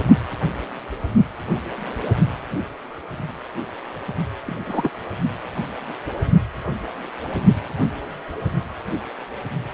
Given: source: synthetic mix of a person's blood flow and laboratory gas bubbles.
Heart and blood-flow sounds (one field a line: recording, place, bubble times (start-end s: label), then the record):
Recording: Doppler ultrasound of blood flow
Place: precordium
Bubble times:
4.46-4.90 s: bubbles
From the record:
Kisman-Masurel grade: 122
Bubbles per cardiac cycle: 1 to 2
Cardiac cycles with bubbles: 10 to 50%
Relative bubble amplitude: moderate (0.250 to 0.450)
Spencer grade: 2 (many but less than half of the cardiac periods contain bubble signals, singularly or in groups)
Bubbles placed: only in the low amplitude regions of the cardiac cycle